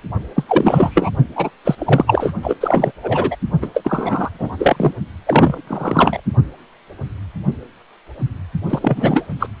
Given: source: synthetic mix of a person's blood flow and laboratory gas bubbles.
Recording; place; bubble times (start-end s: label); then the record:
Doppler ultrasound of blood flow; precordium
0.35-0.43 s: bubbles
0.47-1.10 s: bubbles
1.35-1.50 s: bubbles
1.65-1.75 s: bubbles
1.78-2.33 s: bubbles
2.42-2.55 s: bubbles
2.60-2.92 s: bubbles
3.02-3.36 s: bubbles
3.61-3.70 s: bubbles
3.74-4.30 s: bubbles
4.34-4.56 s: bubbles
4.59-4.93 s: bubbles
5.27-5.61 s: bubbles
5.67-6.21 s: bubbles
8.70-9.26 s: bubbles
9.39-9.47 s: bubbles
From the record:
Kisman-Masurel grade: 333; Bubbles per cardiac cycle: rolling drumbeat, 9 or more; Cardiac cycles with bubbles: 50 to 99%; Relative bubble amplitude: loud (0.450 to 0.775); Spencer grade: 3 (all of the cardiac periods contain showers or single bubble signals, but not dominating or overriding the cardiac motion signals); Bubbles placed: only in the low amplitude regions of the cardiac cycle